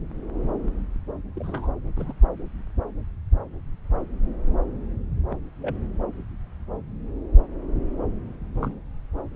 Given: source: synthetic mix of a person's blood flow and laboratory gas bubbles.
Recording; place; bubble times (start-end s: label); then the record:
Doppler ultrasound of blood flow; subclavian vein
1.34-1.70 s: bubbles
1.96-2.13 s: bubbles
5.29-5.35 s: bubbles
5.61-5.76 s: bubbles
8.54-8.75 s: bubbles
From the record:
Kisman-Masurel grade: 121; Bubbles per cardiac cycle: 1 to 2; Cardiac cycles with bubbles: 10 to 50%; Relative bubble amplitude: barely perceptible (0.100 to 0.250); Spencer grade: 2 (many but less than half of the cardiac periods contain bubble signals, singularly or in groups); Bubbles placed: anywhere in the cardiac cycle